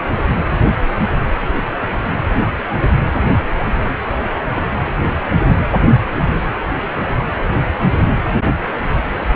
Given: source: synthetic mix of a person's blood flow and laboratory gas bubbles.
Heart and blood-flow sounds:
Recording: Doppler ultrasound of blood flow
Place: precordium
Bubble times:
1.38-1.48 s: bubbles
1.55-1.72 s: bubbles
5.76-5.82 s: bubbles
From the record:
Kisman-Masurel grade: 121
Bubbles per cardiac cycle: 1 to 2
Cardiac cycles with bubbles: 10 to 50%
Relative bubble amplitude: barely perceptible (0.100 to 0.250)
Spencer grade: 2 (many but less than half of the cardiac periods contain bubble signals, singularly or in groups)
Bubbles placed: anywhere in the cardiac cycle

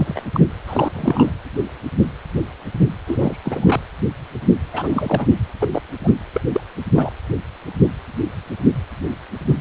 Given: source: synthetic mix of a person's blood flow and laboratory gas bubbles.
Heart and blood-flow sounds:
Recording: Doppler ultrasound of blood flow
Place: precordium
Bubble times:
0.00-0.22 s: bubbles
0.33-0.40 s: bubbles
0.68-0.92 s: bubbles
0.94-1.31 s: bubbles
3.07-3.37 s: bubbles
3.45-3.81 s: bubbles
4.73-5.26 s: bubbles
5.60-5.69 s: bubbles
5.71-5.82 s: bubbles
6.04-6.12 s: bubbles
6.33-6.41 s: bubbles
6.52-6.61 s: bubbles
6.95-7.11 s: bubbles
From the record:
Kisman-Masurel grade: 222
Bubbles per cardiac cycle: several, 3 to 8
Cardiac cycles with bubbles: 10 to 50%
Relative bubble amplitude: moderate (0.250 to 0.450)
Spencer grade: 2 (many but less than half of the cardiac periods contain bubble signals, singularly or in groups)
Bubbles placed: anywhere in the cardiac cycle

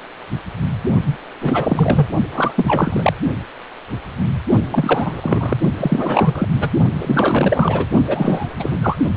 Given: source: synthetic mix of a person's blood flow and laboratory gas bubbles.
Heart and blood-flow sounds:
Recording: Doppler ultrasound of blood flow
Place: precordium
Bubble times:
1.06-1.18 s: bubbles
1.40-2.07 s: bubbles
2.32-3.13 s: bubbles
4.71-5.57 s: bubbles
5.77-6.48 s: bubbles
6.60-6.71 s: bubbles
6.99-7.86 s: bubbles
8.07-8.78 s: bubbles
8.82-8.98 s: bubbles
From the record:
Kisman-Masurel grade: 333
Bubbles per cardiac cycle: rolling drumbeat, 9 or more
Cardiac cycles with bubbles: 50 to 99%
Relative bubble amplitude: loud (0.450 to 0.775)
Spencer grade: 3 (all of the cardiac periods contain showers or single bubble signals, but not dominating or overriding the cardiac motion signals)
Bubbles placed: only in the low amplitude regions of the cardiac cycle

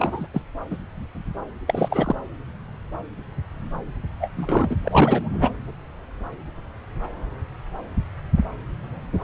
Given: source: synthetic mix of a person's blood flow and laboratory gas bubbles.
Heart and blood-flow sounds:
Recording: Doppler ultrasound of blood flow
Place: subclavian vein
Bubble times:
0.00-0.27 s: bubbles
0.34-0.42 s: bubbles
0.71-0.77 s: bubbles
1.68-2.15 s: bubbles
4.20-4.28 s: bubbles
4.37-4.76 s: bubbles
4.83-5.29 s: bubbles
5.32-5.51 s: bubbles
From the record:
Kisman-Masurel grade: 222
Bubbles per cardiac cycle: several, 3 to 8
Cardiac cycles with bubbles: 10 to 50%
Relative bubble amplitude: moderate (0.250 to 0.450)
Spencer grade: 2 (many but less than half of the cardiac periods contain bubble signals, singularly or in groups)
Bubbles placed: anywhere in the cardiac cycle

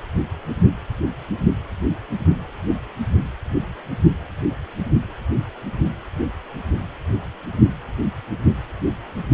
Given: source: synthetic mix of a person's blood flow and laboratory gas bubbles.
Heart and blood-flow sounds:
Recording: Doppler ultrasound of blood flow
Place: precordium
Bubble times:
no bubbles
From the record:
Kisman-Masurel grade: 000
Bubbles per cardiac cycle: 0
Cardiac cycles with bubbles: 0%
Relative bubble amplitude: no bubbles discernible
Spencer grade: 0 (complete lack of bubble signals)

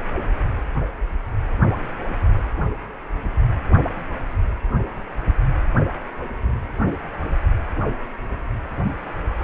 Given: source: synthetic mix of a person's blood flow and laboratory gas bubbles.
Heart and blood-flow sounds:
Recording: Doppler ultrasound of blood flow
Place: precordium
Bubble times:
no bubbles
From the record:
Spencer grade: 0 (complete lack of bubble signals)

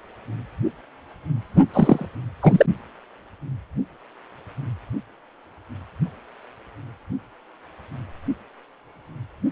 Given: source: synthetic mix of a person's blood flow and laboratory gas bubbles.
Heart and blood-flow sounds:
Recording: Doppler ultrasound of blood flow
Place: precordium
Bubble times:
1.73-2.06 s: bubbles
2.41-2.66 s: bubbles
From the record:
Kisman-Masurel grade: 223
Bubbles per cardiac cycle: several, 3 to 8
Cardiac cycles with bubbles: 10 to 50%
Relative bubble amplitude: loud (0.450 to 0.775)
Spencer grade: 2 (many but less than half of the cardiac periods contain bubble signals, singularly or in groups)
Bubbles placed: only in the low amplitude regions of the cardiac cycle

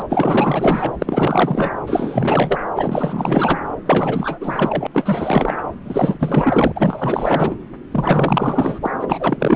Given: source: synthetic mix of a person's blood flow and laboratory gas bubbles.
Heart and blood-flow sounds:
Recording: Doppler ultrasound of blood flow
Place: subclavian vein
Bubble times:
0.00-0.04 s: bubbles
0.09-0.93 s: bubbles
0.99-1.71 s: bubbles
1.86-2.58 s: bubbles
2.75-3.58 s: bubbles
3.85-4.87 s: bubbles
4.93-5.63 s: bubbles
5.84-6.72 s: bubbles
6.75-7.56 s: bubbles
7.91-8.79 s: bubbles
8.82-8.90 s: bubbles
9.00-9.56 s: bubbles
From the record:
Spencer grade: 4 (maximum detectable bubble signal sounding continuously throughout systole and diastole of every cardiac period, and overriding the amplitude of the normal cardiac signals)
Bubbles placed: anywhere in the cardiac cycle

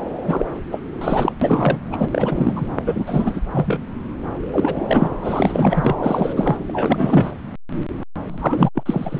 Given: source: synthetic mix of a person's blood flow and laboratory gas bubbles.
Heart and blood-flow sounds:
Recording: Doppler ultrasound of blood flow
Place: subclavian vein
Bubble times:
0.26-0.46 s: bubbles
0.71-0.82 s: bubbles
1.01-1.32 s: bubbles
1.41-1.78 s: bubbles
1.92-2.08 s: bubbles
2.11-2.68 s: bubbles
2.85-3.40 s: bubbles
3.52-3.84 s: bubbles
4.53-5.11 s: bubbles
5.21-5.95 s: bubbles
6.02-6.33 s: bubbles
6.36-7.31 s: bubbles
8.22-8.69 s: bubbles
8.74-9.20 s: bubbles
From the record:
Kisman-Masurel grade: 333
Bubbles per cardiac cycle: rolling drumbeat, 9 or more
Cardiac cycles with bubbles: 50 to 99%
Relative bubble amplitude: loud (0.450 to 0.775)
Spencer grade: 3 (all of the cardiac periods contain showers or single bubble signals, but not dominating or overriding the cardiac motion signals)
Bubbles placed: anywhere in the cardiac cycle

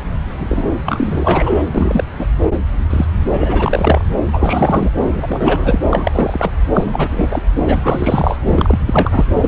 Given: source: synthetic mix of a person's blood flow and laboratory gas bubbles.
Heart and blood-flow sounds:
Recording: Doppler ultrasound of blood flow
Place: subclavian vein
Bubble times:
0.26-0.66 s: bubbles
0.86-1.62 s: bubbles
1.75-2.04 s: bubbles
2.19-2.26 s: bubbles
2.90-3.05 s: bubbles
3.26-4.04 s: bubbles
4.33-4.90 s: bubbles
5.14-5.79 s: bubbles
5.91-6.52 s: bubbles
6.73-7.08 s: bubbles
7.11-7.42 s: bubbles
7.67-8.37 s: bubbles
8.46-8.80 s: bubbles
8.87-9.25 s: bubbles
9.36-9.47 s: bubbles
From the record:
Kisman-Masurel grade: 343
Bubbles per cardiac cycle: rolling drumbeat, 9 or more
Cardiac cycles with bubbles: 100%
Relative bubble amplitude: loud (0.450 to 0.775)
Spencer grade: 3 (all of the cardiac periods contain showers or single bubble signals, but not dominating or overriding the cardiac motion signals)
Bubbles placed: anywhere in the cardiac cycle

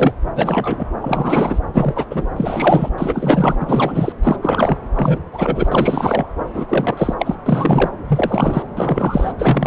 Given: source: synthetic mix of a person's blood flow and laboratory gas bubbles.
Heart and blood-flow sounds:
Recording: Doppler ultrasound of blood flow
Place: subclavian vein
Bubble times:
0.00-0.15 s: bubbles
0.35-0.86 s: bubbles
1.01-1.60 s: bubbles
1.74-2.05 s: bubbles
2.10-2.27 s: bubbles
2.36-2.89 s: bubbles
2.97-3.56 s: bubbles
3.60-4.12 s: bubbles
4.22-4.37 s: bubbles
4.42-4.77 s: bubbles
4.95-5.18 s: bubbles
5.33-6.26 s: bubbles
6.54-6.65 s: bubbles
6.68-7.14 s: bubbles
7.18-7.35 s: bubbles
7.46-7.89 s: bubbles
8.08-8.65 s: bubbles
8.77-9.33 s: bubbles
9.38-9.67 s: bubbles
From the record:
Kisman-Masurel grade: 343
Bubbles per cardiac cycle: rolling drumbeat, 9 or more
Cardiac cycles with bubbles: 100%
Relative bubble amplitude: loud (0.450 to 0.775)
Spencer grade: 3 (all of the cardiac periods contain showers or single bubble signals, but not dominating or overriding the cardiac motion signals)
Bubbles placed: anywhere in the cardiac cycle

